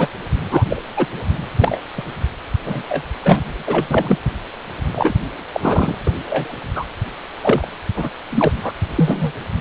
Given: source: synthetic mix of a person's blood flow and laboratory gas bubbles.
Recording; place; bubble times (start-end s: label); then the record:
Doppler ultrasound of blood flow; precordium
0.00-0.08 s: bubbles
0.52-0.66 s: bubbles
0.69-0.82 s: bubbles
0.96-1.06 s: bubbles
1.58-1.80 s: bubbles
1.97-2.04 s: bubbles
2.66-2.83 s: bubbles
2.89-3.03 s: bubbles
3.21-3.64 s: bubbles
3.67-3.87 s: bubbles
3.91-4.18 s: bubbles
4.95-5.14 s: bubbles
5.54-6.12 s: bubbles
6.26-6.53 s: bubbles
6.75-6.84 s: bubbles
7.42-7.67 s: bubbles
7.96-8.10 s: bubbles
8.30-8.71 s: bubbles
8.96-9.32 s: bubbles
From the record:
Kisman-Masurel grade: 243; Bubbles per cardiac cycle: several, 3 to 8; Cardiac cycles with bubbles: 100%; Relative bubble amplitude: loud (0.450 to 0.775); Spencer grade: 3 (all of the cardiac periods contain showers or single bubble signals, but not dominating or overriding the cardiac motion signals); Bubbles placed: anywhere in the cardiac cycle